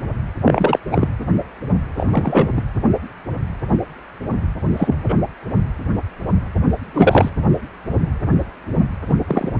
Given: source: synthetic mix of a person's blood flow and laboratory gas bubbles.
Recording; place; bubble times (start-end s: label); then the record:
Doppler ultrasound of blood flow; precordium
0.44-0.79 s: bubbles
0.91-1.08 s: bubbles
1.97-2.06 s: bubbles
2.10-2.62 s: bubbles
4.77-5.16 s: bubbles
6.93-7.29 s: bubbles
9.09-9.15 s: bubbles
9.27-9.51 s: bubbles
From the record:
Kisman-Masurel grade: 223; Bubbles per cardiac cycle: several, 3 to 8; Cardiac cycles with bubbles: 10 to 50%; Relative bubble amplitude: loud (0.450 to 0.775); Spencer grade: 2 (many but less than half of the cardiac periods contain bubble signals, singularly or in groups); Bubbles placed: anywhere in the cardiac cycle